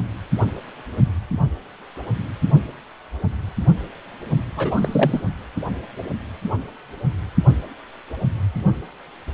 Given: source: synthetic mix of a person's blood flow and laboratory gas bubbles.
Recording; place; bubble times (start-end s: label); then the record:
Doppler ultrasound of blood flow; precordium
4.56-5.21 s: bubbles
From the record:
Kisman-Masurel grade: 212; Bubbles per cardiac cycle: several, 3 to 8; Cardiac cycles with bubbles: 1 to 10%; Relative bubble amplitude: moderate (0.250 to 0.450); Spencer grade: 1 (occasional bubble signal discernible with the cardiac motion signal, with majority of cardiac periods free of bubbles); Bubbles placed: only in the low amplitude regions of the cardiac cycle